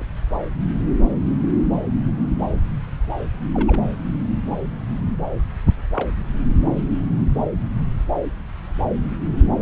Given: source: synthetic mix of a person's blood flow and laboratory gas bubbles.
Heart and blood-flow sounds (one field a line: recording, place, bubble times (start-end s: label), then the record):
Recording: Doppler ultrasound of blood flow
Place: subclavian vein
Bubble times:
0.00-0.05 s: bubbles
3.54-3.82 s: bubbles
5.93-6.11 s: bubbles
From the record:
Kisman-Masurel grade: 121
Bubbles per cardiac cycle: 1 to 2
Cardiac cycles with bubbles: 10 to 50%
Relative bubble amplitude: barely perceptible (0.100 to 0.250)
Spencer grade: 2 (many but less than half of the cardiac periods contain bubble signals, singularly or in groups)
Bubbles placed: anywhere in the cardiac cycle